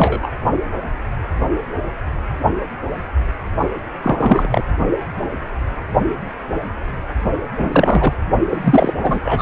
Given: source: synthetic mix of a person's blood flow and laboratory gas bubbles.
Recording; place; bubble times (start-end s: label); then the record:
Doppler ultrasound of blood flow; precordium
0.00-0.30 s: bubbles
4.03-4.47 s: bubbles
4.51-4.64 s: bubbles
7.57-8.13 s: bubbles
8.49-8.95 s: bubbles
9.03-9.42 s: bubbles
From the record:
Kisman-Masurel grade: 233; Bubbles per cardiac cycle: several, 3 to 8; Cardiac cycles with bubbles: 50 to 99%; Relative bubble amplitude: loud (0.450 to 0.775); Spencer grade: 3 (all of the cardiac periods contain showers or single bubble signals, but not dominating or overriding the cardiac motion signals); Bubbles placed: only in the low amplitude regions of the cardiac cycle